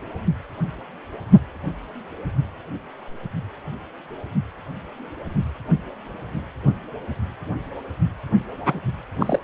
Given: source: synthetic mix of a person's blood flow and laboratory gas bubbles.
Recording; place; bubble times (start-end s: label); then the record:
Doppler ultrasound of blood flow; precordium
8.64-8.79 s: bubbles
9.18-9.39 s: bubbles
From the record:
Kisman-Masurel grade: 212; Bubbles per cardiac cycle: several, 3 to 8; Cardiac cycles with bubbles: 1 to 10%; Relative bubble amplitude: moderate (0.250 to 0.450); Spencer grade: 1 (occasional bubble signal discernible with the cardiac motion signal, with majority of cardiac periods free of bubbles); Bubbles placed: anywhere in the cardiac cycle